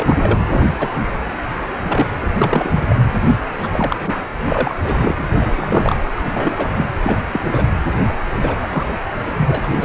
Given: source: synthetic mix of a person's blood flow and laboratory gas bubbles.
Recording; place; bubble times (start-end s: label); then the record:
Doppler ultrasound of blood flow; precordium
0.00-0.40 s: bubbles
0.49-0.89 s: bubbles
1.89-2.07 s: bubbles
2.38-2.73 s: bubbles
2.76-2.85 s: bubbles
2.89-3.04 s: bubbles
3.62-3.69 s: bubbles
3.73-4.15 s: bubbles
4.49-4.75 s: bubbles
4.83-4.96 s: bubbles
5.01-5.14 s: bubbles
5.18-5.24 s: bubbles
5.32-5.97 s: bubbles
6.17-6.74 s: bubbles
6.76-6.86 s: bubbles
7.03-7.18 s: bubbles
7.33-7.64 s: bubbles
8.42-8.56 s: bubbles
8.61-8.87 s: bubbles
9.36-9.68 s: bubbles
9.71-9.85 s: bubbles
From the record:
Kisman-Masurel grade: 242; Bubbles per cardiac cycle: several, 3 to 8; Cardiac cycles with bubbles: 100%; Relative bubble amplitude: moderate (0.250 to 0.450); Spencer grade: 3 (all of the cardiac periods contain showers or single bubble signals, but not dominating or overriding the cardiac motion signals); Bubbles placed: anywhere in the cardiac cycle